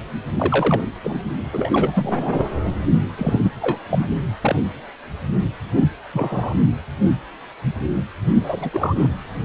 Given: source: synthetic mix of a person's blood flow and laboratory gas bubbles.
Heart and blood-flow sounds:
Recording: Doppler ultrasound of blood flow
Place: precordium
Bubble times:
0.36-0.81 s: bubbles
1.03-1.20 s: bubbles
1.52-2.45 s: bubbles
3.18-3.40 s: bubbles
3.43-3.51 s: bubbles
3.62-3.79 s: bubbles
3.90-4.08 s: bubbles
4.41-4.56 s: bubbles
5.76-5.86 s: bubbles
6.13-6.54 s: bubbles
8.41-8.70 s: bubbles
8.73-9.10 s: bubbles
From the record:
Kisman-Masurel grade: 232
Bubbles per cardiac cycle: several, 3 to 8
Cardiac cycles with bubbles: 50 to 99%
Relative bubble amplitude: moderate (0.250 to 0.450)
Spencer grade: 3 (all of the cardiac periods contain showers or single bubble signals, but not dominating or overriding the cardiac motion signals)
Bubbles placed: anywhere in the cardiac cycle

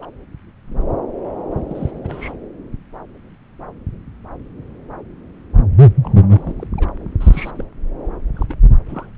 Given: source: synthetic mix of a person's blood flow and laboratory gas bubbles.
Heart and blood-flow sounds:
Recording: Doppler ultrasound of blood flow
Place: subclavian vein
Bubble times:
0.02-0.06 s: bubbles
1.53-1.65 s: bubbles
1.68-1.99 s: bubbles
2.04-2.32 s: bubbles
6.03-6.54 s: bubbles
6.57-6.67 s: bubbles
6.73-7.02 s: bubbles
7.20-7.51 s: bubbles
7.57-7.64 s: bubbles
8.34-8.57 s: bubbles
8.89-9.10 s: bubbles
From the record:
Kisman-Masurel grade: 221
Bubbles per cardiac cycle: several, 3 to 8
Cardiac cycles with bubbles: 10 to 50%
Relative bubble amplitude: barely perceptible (0.100 to 0.250)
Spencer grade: 2 (many but less than half of the cardiac periods contain bubble signals, singularly or in groups)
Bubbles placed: anywhere in the cardiac cycle

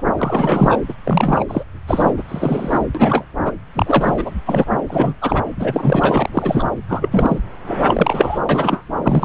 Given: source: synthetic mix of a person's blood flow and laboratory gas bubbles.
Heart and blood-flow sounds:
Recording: Doppler ultrasound of blood flow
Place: subclavian vein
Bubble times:
0.17-0.79 s: bubbles
0.89-0.94 s: bubbles
1.03-1.45 s: bubbles
1.48-1.64 s: bubbles
1.87-2.12 s: bubbles
2.17-2.22 s: bubbles
2.28-2.78 s: bubbles
2.95-3.25 s: bubbles
3.45-3.52 s: bubbles
3.74-4.35 s: bubbles
4.46-4.65 s: bubbles
4.88-5.15 s: bubbles
5.21-5.45 s: bubbles
5.60-6.71 s: bubbles
6.88-7.39 s: bubbles
7.67-8.39 s: bubbles
8.49-8.83 s: bubbles
9.02-9.25 s: bubbles
From the record:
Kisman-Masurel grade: 343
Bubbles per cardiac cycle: rolling drumbeat, 9 or more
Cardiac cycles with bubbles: 100%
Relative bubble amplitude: loud (0.450 to 0.775)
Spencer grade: 3 (all of the cardiac periods contain showers or single bubble signals, but not dominating or overriding the cardiac motion signals)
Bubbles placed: anywhere in the cardiac cycle

